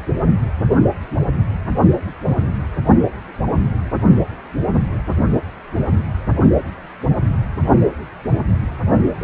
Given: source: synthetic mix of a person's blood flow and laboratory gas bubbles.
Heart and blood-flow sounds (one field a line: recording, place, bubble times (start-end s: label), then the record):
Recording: Doppler ultrasound of blood flow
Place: precordium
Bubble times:
9.20-9.24 s: bubbles
From the record:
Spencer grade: 1 (occasional bubble signal discernible with the cardiac motion signal, with majority of cardiac periods free of bubbles)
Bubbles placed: only in the low amplitude regions of the cardiac cycle